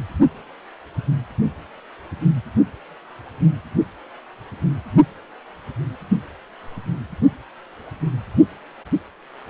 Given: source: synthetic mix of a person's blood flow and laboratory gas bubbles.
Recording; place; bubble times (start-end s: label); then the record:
Doppler ultrasound of blood flow; precordium
no bubbles
From the record:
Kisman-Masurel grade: 000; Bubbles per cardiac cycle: 0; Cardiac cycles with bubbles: 0%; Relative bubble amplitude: no bubbles discernible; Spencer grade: 0 (complete lack of bubble signals)